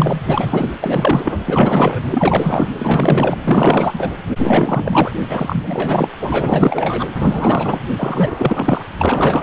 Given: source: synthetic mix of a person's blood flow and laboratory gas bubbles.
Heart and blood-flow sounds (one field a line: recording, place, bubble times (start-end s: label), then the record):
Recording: Doppler ultrasound of blood flow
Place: precordium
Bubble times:
0.00-0.21 s: bubbles
0.27-0.78 s: bubbles
0.80-1.40 s: bubbles
1.46-1.99 s: bubbles
2.11-2.69 s: bubbles
2.78-3.38 s: bubbles
3.44-4.10 s: bubbles
4.37-5.12 s: bubbles
5.29-6.08 s: bubbles
6.21-7.07 s: bubbles
7.16-7.82 s: bubbles
7.98-8.83 s: bubbles
8.98-9.43 s: bubbles
From the record:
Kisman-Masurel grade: 444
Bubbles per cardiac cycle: continuous sound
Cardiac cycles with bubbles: 100%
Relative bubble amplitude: maximal (0.775 to 0.999)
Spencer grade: 4 (maximum detectable bubble signal sounding continuously throughout systole and diastole of every cardiac period, and overriding the amplitude of the normal cardiac signals)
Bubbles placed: anywhere in the cardiac cycle